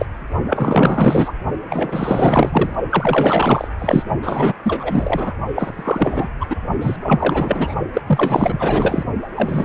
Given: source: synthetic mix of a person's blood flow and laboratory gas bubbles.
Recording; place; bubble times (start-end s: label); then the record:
Doppler ultrasound of blood flow; precordium
0.00-0.05 s: bubbles
0.47-1.33 s: bubbles
1.66-2.75 s: bubbles
2.90-3.68 s: bubbles
3.79-4.03 s: bubbles
4.22-4.54 s: bubbles
4.63-5.34 s: bubbles
5.55-6.29 s: bubbles
6.40-6.46 s: bubbles
6.49-6.57 s: bubbles
6.81-6.96 s: bubbles
7.02-7.74 s: bubbles
7.93-8.01 s: bubbles
8.06-9.04 s: bubbles
9.35-9.65 s: bubbles
From the record:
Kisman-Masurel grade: 444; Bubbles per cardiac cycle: continuous sound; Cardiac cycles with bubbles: 100%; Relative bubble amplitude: maximal (0.775 to 0.999); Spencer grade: 4 (maximum detectable bubble signal sounding continuously throughout systole and diastole of every cardiac period, and overriding the amplitude of the normal cardiac signals); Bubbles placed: only in the low amplitude regions of the cardiac cycle